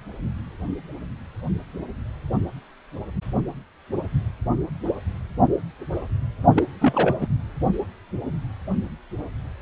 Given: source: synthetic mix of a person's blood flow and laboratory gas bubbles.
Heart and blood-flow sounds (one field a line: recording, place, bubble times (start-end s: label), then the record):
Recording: Doppler ultrasound of blood flow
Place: precordium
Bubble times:
6.55-6.67 s: bubbles
6.80-7.16 s: bubbles
7.21-7.27 s: bubbles
From the record:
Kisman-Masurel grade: 212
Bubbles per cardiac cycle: several, 3 to 8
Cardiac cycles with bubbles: 1 to 10%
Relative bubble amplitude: moderate (0.250 to 0.450)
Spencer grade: 1 (occasional bubble signal discernible with the cardiac motion signal, with majority of cardiac periods free of bubbles)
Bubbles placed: only in the low amplitude regions of the cardiac cycle